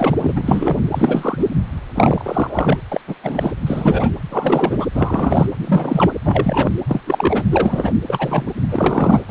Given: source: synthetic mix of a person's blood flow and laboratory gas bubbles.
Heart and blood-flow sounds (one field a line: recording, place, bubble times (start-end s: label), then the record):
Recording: Doppler ultrasound of blood flow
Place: precordium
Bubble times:
0.00-0.32 s: bubbles
0.36-0.77 s: bubbles
0.92-1.46 s: bubbles
1.94-2.77 s: bubbles
2.92-3.00 s: bubbles
3.07-3.15 s: bubbles
3.23-3.52 s: bubbles
3.66-4.10 s: bubbles
4.31-4.86 s: bubbles
4.94-5.46 s: bubbles
5.60-6.14 s: bubbles
6.25-6.71 s: bubbles
6.87-7.00 s: bubbles
7.05-7.44 s: bubbles
7.51-7.92 s: bubbles
8.08-8.53 s: bubbles
8.70-9.24 s: bubbles
9.27-9.31 s: bubbles
From the record:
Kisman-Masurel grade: 343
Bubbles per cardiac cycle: rolling drumbeat, 9 or more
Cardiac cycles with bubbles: 100%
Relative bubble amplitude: loud (0.450 to 0.775)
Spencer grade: 3 (all of the cardiac periods contain showers or single bubble signals, but not dominating or overriding the cardiac motion signals)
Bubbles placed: anywhere in the cardiac cycle